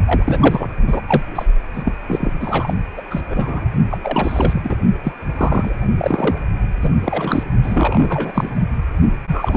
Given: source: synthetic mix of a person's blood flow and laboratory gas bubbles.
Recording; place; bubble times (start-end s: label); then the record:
Doppler ultrasound of blood flow; precordium
0.05-0.68 s: bubbles
0.87-1.00 s: bubbles
1.07-1.22 s: bubbles
1.35-1.45 s: bubbles
1.73-1.92 s: bubbles
2.07-2.31 s: bubbles
2.40-2.74 s: bubbles
2.97-3.01 s: bubbles
3.10-3.21 s: bubbles
3.30-3.68 s: bubbles
3.91-3.97 s: bubbles
4.03-4.75 s: bubbles
5.04-5.12 s: bubbles
5.36-5.75 s: bubbles
5.97-6.38 s: bubbles
6.81-6.92 s: bubbles
7.00-7.43 s: bubbles
7.62-8.49 s: bubbles
9.32-9.57 s: bubbles
From the record:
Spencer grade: 3 (all of the cardiac periods contain showers or single bubble signals, but not dominating or overriding the cardiac motion signals); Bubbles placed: only in the low amplitude regions of the cardiac cycle